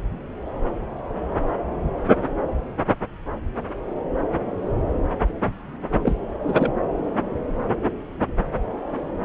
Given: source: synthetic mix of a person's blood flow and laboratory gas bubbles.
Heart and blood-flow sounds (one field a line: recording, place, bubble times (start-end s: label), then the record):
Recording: Doppler ultrasound of blood flow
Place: subclavian vein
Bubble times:
6.03-6.15 s: bubbles
6.42-6.73 s: bubbles
From the record:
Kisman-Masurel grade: 212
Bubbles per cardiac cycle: several, 3 to 8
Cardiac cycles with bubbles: 1 to 10%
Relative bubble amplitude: moderate (0.250 to 0.450)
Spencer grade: 1 (occasional bubble signal discernible with the cardiac motion signal, with majority of cardiac periods free of bubbles)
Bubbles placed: anywhere in the cardiac cycle